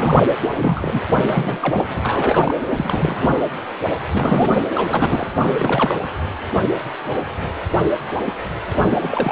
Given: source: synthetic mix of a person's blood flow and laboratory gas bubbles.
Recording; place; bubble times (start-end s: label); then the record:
Doppler ultrasound of blood flow; precordium
0.00-0.22 s: bubbles
0.40-1.00 s: bubbles
1.16-1.58 s: bubbles
1.61-1.84 s: bubbles
1.89-2.00 s: bubbles
2.04-2.54 s: bubbles
2.68-3.41 s: bubbles
4.08-4.65 s: bubbles
4.75-5.27 s: bubbles
5.35-5.95 s: bubbles
8.84-9.32 s: bubbles
From the record:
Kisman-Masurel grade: 332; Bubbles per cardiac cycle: rolling drumbeat, 9 or more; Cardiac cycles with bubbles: 50 to 99%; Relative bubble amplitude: moderate (0.250 to 0.450); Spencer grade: 3 (all of the cardiac periods contain showers or single bubble signals, but not dominating or overriding the cardiac motion signals); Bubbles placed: anywhere in the cardiac cycle